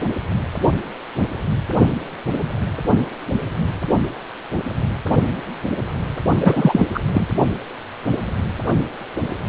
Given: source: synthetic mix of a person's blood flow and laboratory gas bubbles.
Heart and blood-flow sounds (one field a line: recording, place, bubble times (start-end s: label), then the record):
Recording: Doppler ultrasound of blood flow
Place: precordium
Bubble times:
6.40-6.87 s: bubbles
6.94-7.00 s: bubbles
7.13-7.26 s: bubbles
From the record:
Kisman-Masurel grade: 213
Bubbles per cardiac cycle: several, 3 to 8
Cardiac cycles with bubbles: 1 to 10%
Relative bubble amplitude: loud (0.450 to 0.775)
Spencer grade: 1 (occasional bubble signal discernible with the cardiac motion signal, with majority of cardiac periods free of bubbles)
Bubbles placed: only in the low amplitude regions of the cardiac cycle